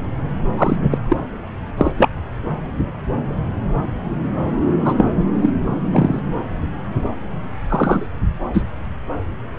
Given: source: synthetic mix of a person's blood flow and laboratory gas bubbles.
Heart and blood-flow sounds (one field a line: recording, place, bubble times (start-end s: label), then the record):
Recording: Doppler ultrasound of blood flow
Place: subclavian vein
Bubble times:
0.57-0.77 s: bubbles
0.90-0.98 s: bubbles
1.09-1.16 s: bubbles
1.78-1.92 s: bubbles
1.97-2.09 s: bubbles
4.84-4.94 s: bubbles
4.96-5.10 s: bubbles
5.41-5.50 s: bubbles
5.92-6.20 s: bubbles
7.68-8.06 s: bubbles
8.53-8.62 s: bubbles
From the record:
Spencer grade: 2 (many but less than half of the cardiac periods contain bubble signals, singularly or in groups)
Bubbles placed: anywhere in the cardiac cycle